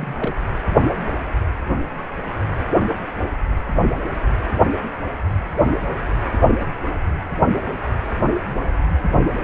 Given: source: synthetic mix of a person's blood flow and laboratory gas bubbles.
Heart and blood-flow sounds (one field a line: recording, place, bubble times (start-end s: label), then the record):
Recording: Doppler ultrasound of blood flow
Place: precordium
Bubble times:
0.00-0.41 s: bubbles
From the record:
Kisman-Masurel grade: 211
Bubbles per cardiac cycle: several, 3 to 8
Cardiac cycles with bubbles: 1 to 10%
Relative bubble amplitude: barely perceptible (0.100 to 0.250)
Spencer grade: 1 (occasional bubble signal discernible with the cardiac motion signal, with majority of cardiac periods free of bubbles)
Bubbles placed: anywhere in the cardiac cycle